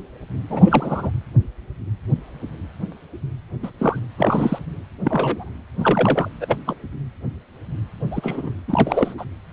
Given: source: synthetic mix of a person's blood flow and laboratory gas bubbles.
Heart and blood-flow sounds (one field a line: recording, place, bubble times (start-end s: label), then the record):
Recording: Doppler ultrasound of blood flow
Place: precordium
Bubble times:
0.49-1.10 s: bubbles
3.62-3.71 s: bubbles
3.80-3.99 s: bubbles
4.18-4.59 s: bubbles
5.04-5.49 s: bubbles
5.79-6.29 s: bubbles
6.40-6.57 s: bubbles
6.66-6.76 s: bubbles
8.11-8.50 s: bubbles
8.68-9.14 s: bubbles
9.18-9.25 s: bubbles
From the record:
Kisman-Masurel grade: 232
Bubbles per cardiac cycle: several, 3 to 8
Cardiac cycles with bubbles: 50 to 99%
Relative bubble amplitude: moderate (0.250 to 0.450)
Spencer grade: 3 (all of the cardiac periods contain showers or single bubble signals, but not dominating or overriding the cardiac motion signals)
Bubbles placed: anywhere in the cardiac cycle